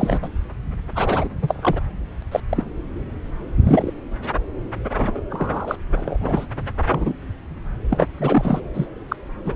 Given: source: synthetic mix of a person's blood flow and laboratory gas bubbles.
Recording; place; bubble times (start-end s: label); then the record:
Doppler ultrasound of blood flow; subclavian vein
0.00-0.28 s: bubbles
0.95-1.29 s: bubbles
1.42-1.81 s: bubbles
2.22-2.24 s: bubbles
2.31-2.40 s: bubbles
2.49-2.63 s: bubbles
3.63-3.91 s: bubbles
4.95-5.21 s: bubbles
5.30-5.76 s: bubbles
5.95-6.18 s: bubbles
6.20-6.47 s: bubbles
6.88-7.14 s: bubbles
7.90-8.07 s: bubbles
8.17-8.60 s: bubbles
8.73-8.88 s: bubbles
9.08-9.16 s: bubbles
9.45-9.55 s: bubbles
From the record:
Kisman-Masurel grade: 233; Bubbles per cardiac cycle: several, 3 to 8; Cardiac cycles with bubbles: 50 to 99%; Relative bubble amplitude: loud (0.450 to 0.775); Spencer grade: 3 (all of the cardiac periods contain showers or single bubble signals, but not dominating or overriding the cardiac motion signals); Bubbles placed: anywhere in the cardiac cycle